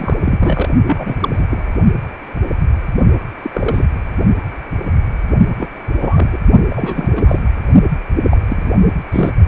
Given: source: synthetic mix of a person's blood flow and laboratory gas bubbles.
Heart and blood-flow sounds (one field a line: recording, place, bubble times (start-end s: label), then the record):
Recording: Doppler ultrasound of blood flow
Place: precordium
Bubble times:
0.00-0.14 s: bubbles
0.22-0.69 s: bubbles
0.85-1.17 s: bubbles
1.21-1.29 s: bubbles
1.31-1.47 s: bubbles
1.50-1.64 s: bubbles
3.42-3.50 s: bubbles
3.54-3.85 s: bubbles
5.58-5.69 s: bubbles
5.99-6.29 s: bubbles
6.33-6.38 s: bubbles
6.70-7.39 s: bubbles
8.23-8.38 s: bubbles
8.40-8.73 s: bubbles
9.12-9.33 s: bubbles
From the record:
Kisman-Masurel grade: 232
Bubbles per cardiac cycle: several, 3 to 8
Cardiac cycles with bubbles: 50 to 99%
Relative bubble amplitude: moderate (0.250 to 0.450)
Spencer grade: 3 (all of the cardiac periods contain showers or single bubble signals, but not dominating or overriding the cardiac motion signals)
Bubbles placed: only in the low amplitude regions of the cardiac cycle